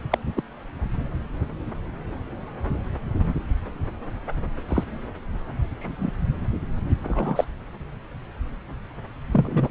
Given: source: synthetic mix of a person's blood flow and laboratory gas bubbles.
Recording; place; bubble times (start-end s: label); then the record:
Doppler ultrasound of blood flow; subclavian vein
0.10-0.18 s: bubbles
0.36-0.42 s: bubbles
4.68-4.83 s: bubbles
5.79-6.12 s: bubbles
7.04-7.44 s: bubbles
9.32-9.71 s: bubbles
From the record:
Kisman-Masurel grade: 122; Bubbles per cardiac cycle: 1 to 2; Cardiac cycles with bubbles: 10 to 50%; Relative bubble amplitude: moderate (0.250 to 0.450); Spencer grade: 2 (many but less than half of the cardiac periods contain bubble signals, singularly or in groups); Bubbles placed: anywhere in the cardiac cycle